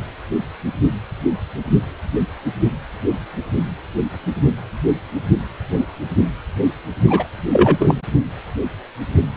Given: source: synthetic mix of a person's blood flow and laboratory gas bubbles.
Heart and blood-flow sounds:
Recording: Doppler ultrasound of blood flow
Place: precordium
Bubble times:
7.07-7.27 s: bubbles
7.52-7.77 s: bubbles
7.79-7.95 s: bubbles
From the record:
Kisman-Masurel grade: 223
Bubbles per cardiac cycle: several, 3 to 8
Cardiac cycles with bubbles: 10 to 50%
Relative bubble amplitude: loud (0.450 to 0.775)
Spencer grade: 2 (many but less than half of the cardiac periods contain bubble signals, singularly or in groups)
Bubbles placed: only in the low amplitude regions of the cardiac cycle

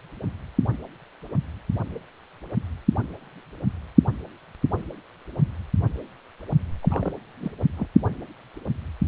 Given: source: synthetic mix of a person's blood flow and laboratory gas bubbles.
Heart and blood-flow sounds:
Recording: Doppler ultrasound of blood flow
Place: precordium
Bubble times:
6.82-7.12 s: bubbles
7.41-7.51 s: bubbles
7.77-7.87 s: bubbles
From the record:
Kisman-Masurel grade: 211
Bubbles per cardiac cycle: several, 3 to 8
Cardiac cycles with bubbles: 1 to 10%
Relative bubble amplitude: barely perceptible (0.100 to 0.250)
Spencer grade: 1 (occasional bubble signal discernible with the cardiac motion signal, with majority of cardiac periods free of bubbles)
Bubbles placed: only in the low amplitude regions of the cardiac cycle

